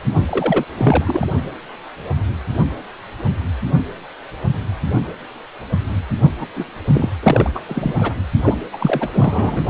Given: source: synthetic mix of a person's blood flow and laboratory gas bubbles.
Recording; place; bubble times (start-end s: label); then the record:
Doppler ultrasound of blood flow; precordium
0.12-0.23 s: bubbles
0.26-0.65 s: bubbles
0.77-1.25 s: bubbles
6.38-6.48 s: bubbles
6.55-6.66 s: bubbles
6.95-7.10 s: bubbles
7.23-7.50 s: bubbles
7.54-7.59 s: bubbles
7.68-7.93 s: bubbles
7.98-8.13 s: bubbles
8.45-8.57 s: bubbles
8.72-9.09 s: bubbles
9.13-9.65 s: bubbles
From the record:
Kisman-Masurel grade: 333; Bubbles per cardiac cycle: rolling drumbeat, 9 or more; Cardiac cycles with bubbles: 50 to 99%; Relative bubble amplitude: loud (0.450 to 0.775); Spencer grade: 3 (all of the cardiac periods contain showers or single bubble signals, but not dominating or overriding the cardiac motion signals); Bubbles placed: only in the low amplitude regions of the cardiac cycle